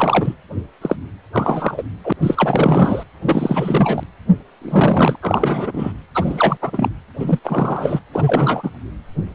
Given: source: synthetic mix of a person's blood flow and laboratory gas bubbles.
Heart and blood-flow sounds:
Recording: Doppler ultrasound of blood flow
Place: precordium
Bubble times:
0.00-0.35 s: bubbles
0.81-0.96 s: bubbles
1.32-1.83 s: bubbles
2.03-2.12 s: bubbles
2.22-3.04 s: bubbles
3.26-4.04 s: bubbles
4.61-5.16 s: bubbles
5.22-5.92 s: bubbles
6.14-6.57 s: bubbles
6.61-6.90 s: bubbles
7.19-7.39 s: bubbles
7.44-8.00 s: bubbles
8.13-8.71 s: bubbles
From the record:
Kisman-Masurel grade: 333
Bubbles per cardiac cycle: rolling drumbeat, 9 or more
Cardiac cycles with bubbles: 50 to 99%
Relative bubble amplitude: loud (0.450 to 0.775)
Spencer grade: 3 (all of the cardiac periods contain showers or single bubble signals, but not dominating or overriding the cardiac motion signals)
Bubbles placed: anywhere in the cardiac cycle

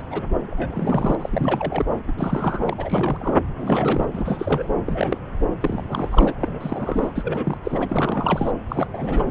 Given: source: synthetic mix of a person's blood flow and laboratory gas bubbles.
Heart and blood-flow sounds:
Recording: Doppler ultrasound of blood flow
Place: subclavian vein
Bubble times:
0.00-0.02 s: bubbles
0.10-0.22 s: bubbles
0.46-1.15 s: bubbles
1.19-1.85 s: bubbles
2.08-2.12 s: bubbles
2.18-2.74 s: bubbles
2.77-3.37 s: bubbles
3.56-4.08 s: bubbles
4.13-4.70 s: bubbles
4.86-5.18 s: bubbles
5.40-5.45 s: bubbles
5.61-6.34 s: bubbles
6.41-7.12 s: bubbles
7.15-7.58 s: bubbles
7.64-8.51 s: bubbles
8.69-9.31 s: bubbles
From the record:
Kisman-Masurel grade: 342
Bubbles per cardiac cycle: rolling drumbeat, 9 or more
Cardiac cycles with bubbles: 100%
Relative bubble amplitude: moderate (0.250 to 0.450)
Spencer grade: 3 (all of the cardiac periods contain showers or single bubble signals, but not dominating or overriding the cardiac motion signals)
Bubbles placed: anywhere in the cardiac cycle

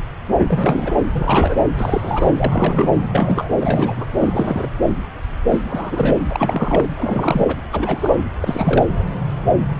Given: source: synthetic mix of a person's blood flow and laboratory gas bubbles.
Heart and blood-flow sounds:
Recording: Doppler ultrasound of blood flow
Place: subclavian vein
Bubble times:
0.48-0.97 s: bubbles
1.11-1.62 s: bubbles
1.76-2.31 s: bubbles
2.36-2.92 s: bubbles
3.11-3.51 s: bubbles
3.59-4.04 s: bubbles
4.19-4.67 s: bubbles
5.50-5.59 s: bubbles
5.66-6.17 s: bubbles
6.32-6.88 s: bubbles
6.96-7.56 s: bubbles
7.72-8.22 s: bubbles
8.40-8.88 s: bubbles
From the record:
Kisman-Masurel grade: 332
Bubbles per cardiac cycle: rolling drumbeat, 9 or more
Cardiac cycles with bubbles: 50 to 99%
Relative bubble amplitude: moderate (0.250 to 0.450)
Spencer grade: 3 (all of the cardiac periods contain showers or single bubble signals, but not dominating or overriding the cardiac motion signals)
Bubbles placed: anywhere in the cardiac cycle

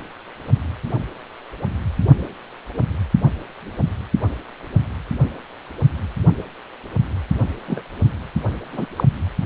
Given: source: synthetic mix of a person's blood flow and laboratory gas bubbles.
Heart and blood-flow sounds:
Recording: Doppler ultrasound of blood flow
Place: precordium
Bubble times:
7.67-7.83 s: bubbles
8.72-8.86 s: bubbles
8.96-9.04 s: bubbles
From the record:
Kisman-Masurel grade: 122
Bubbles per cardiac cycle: 1 to 2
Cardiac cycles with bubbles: 10 to 50%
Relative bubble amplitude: moderate (0.250 to 0.450)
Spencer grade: 2 (many but less than half of the cardiac periods contain bubble signals, singularly or in groups)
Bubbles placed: anywhere in the cardiac cycle

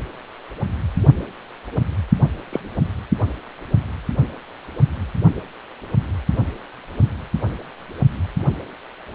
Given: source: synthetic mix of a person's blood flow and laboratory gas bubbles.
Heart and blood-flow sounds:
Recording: Doppler ultrasound of blood flow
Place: precordium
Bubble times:
2.52-2.60 s: bubbles
From the record:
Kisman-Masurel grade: 112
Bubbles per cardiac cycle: 1 to 2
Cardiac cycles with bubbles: 1 to 10%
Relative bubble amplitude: moderate (0.250 to 0.450)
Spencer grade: 1 (occasional bubble signal discernible with the cardiac motion signal, with majority of cardiac periods free of bubbles)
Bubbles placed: only in the low amplitude regions of the cardiac cycle

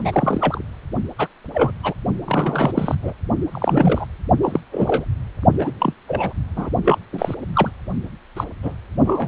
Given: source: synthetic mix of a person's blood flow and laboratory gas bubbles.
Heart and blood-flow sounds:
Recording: Doppler ultrasound of blood flow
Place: precordium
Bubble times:
0.00-0.63 s: bubbles
1.18-1.27 s: bubbles
1.54-1.71 s: bubbles
1.83-1.94 s: bubbles
2.25-2.71 s: bubbles
2.75-2.95 s: bubbles
3.02-3.13 s: bubbles
3.51-4.06 s: bubbles
4.42-4.60 s: bubbles
4.71-5.04 s: bubbles
5.58-5.72 s: bubbles
5.79-5.93 s: bubbles
6.08-6.33 s: bubbles
6.56-6.70 s: bubbles
6.85-6.99 s: bubbles
7.12-7.35 s: bubbles
7.54-7.71 s: bubbles
8.37-8.44 s: bubbles
8.62-8.73 s: bubbles
9.04-9.28 s: bubbles
From the record:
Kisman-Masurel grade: 242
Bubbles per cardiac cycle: several, 3 to 8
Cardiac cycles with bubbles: 100%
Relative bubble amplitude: moderate (0.250 to 0.450)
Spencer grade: 3 (all of the cardiac periods contain showers or single bubble signals, but not dominating or overriding the cardiac motion signals)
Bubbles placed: only in the low amplitude regions of the cardiac cycle

